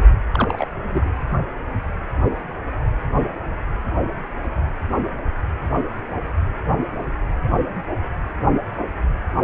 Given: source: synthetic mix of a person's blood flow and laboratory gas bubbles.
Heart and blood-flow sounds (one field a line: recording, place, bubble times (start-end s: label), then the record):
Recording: Doppler ultrasound of blood flow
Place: precordium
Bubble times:
0.32-0.68 s: bubbles
0.90-1.10 s: bubbles
From the record:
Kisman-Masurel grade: 112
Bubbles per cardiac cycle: 1 to 2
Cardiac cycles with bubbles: 1 to 10%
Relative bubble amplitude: moderate (0.250 to 0.450)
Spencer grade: 1 (occasional bubble signal discernible with the cardiac motion signal, with majority of cardiac periods free of bubbles)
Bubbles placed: anywhere in the cardiac cycle